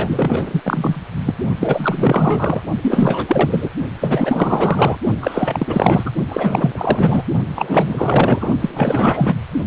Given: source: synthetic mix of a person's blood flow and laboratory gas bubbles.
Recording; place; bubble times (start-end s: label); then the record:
Doppler ultrasound of blood flow; precordium
0.00-0.61 s: bubbles
0.65-1.02 s: bubbles
1.25-1.34 s: bubbles
1.60-2.60 s: bubbles
2.82-3.69 s: bubbles
4.00-4.97 s: bubbles
5.21-6.11 s: bubbles
6.28-7.25 s: bubbles
7.55-8.48 s: bubbles
8.58-9.35 s: bubbles
From the record:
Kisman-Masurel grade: 444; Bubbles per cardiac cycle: continuous sound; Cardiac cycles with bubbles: 100%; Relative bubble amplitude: maximal (0.775 to 0.999); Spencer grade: 4 (maximum detectable bubble signal sounding continuously throughout systole and diastole of every cardiac period, and overriding the amplitude of the normal cardiac signals); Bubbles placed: only in the low amplitude regions of the cardiac cycle